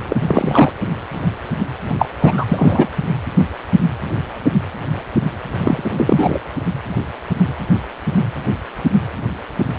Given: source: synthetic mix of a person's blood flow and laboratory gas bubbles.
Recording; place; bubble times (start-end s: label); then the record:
Doppler ultrasound of blood flow; precordium
0.09-0.72 s: bubbles
1.90-1.96 s: bubbles
1.98-2.10 s: bubbles
2.19-2.88 s: bubbles
5.61-6.39 s: bubbles
From the record:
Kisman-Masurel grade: 223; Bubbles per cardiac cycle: several, 3 to 8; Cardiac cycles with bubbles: 10 to 50%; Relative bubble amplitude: loud (0.450 to 0.775); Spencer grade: 2 (many but less than half of the cardiac periods contain bubble signals, singularly or in groups); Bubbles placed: anywhere in the cardiac cycle